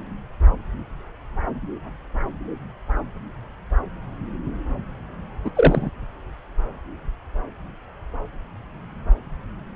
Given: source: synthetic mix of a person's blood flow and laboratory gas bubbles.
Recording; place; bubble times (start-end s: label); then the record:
Doppler ultrasound of blood flow; subclavian vein
5.44-5.50 s: bubbles
5.55-5.91 s: bubbles
From the record:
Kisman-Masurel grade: 213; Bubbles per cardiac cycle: several, 3 to 8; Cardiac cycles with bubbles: 1 to 10%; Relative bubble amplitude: loud (0.450 to 0.775); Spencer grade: 1 (occasional bubble signal discernible with the cardiac motion signal, with majority of cardiac periods free of bubbles); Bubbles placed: anywhere in the cardiac cycle